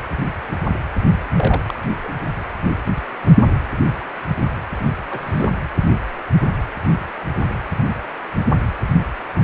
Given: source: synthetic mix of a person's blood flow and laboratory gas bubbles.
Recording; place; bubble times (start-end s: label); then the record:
Doppler ultrasound of blood flow; precordium
1.36-1.61 s: bubbles
1.67-1.73 s: bubbles
2.04-2.08 s: bubbles
5.10-5.51 s: bubbles
From the record:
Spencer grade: 2 (many but less than half of the cardiac periods contain bubble signals, singularly or in groups); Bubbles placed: anywhere in the cardiac cycle